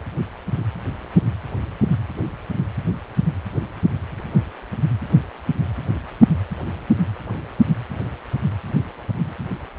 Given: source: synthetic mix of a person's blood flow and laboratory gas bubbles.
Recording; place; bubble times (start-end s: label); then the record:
Doppler ultrasound of blood flow; precordium
no bubbles
From the record:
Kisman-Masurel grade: 000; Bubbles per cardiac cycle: 0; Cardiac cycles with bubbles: 0%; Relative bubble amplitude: no bubbles discernible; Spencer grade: 0 (complete lack of bubble signals)